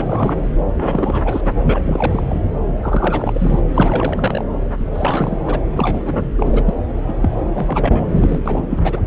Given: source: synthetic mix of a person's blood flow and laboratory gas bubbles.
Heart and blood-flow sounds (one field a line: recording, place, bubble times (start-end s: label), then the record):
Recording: Doppler ultrasound of blood flow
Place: subclavian vein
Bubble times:
0.00-0.51 s: bubbles
0.75-1.44 s: bubbles
1.66-2.43 s: bubbles
2.81-3.60 s: bubbles
3.74-4.44 s: bubbles
4.79-4.84 s: bubbles
4.93-5.38 s: bubbles
5.46-5.59 s: bubbles
5.75-6.29 s: bubbles
6.35-6.73 s: bubbles
7.08-7.14 s: bubbles
7.21-7.29 s: bubbles
7.52-8.40 s: bubbles
8.46-8.67 s: bubbles
8.70-9.00 s: bubbles
From the record:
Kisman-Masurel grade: 342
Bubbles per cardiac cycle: rolling drumbeat, 9 or more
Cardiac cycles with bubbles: 100%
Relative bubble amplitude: moderate (0.250 to 0.450)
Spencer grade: 3 (all of the cardiac periods contain showers or single bubble signals, but not dominating or overriding the cardiac motion signals)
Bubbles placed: anywhere in the cardiac cycle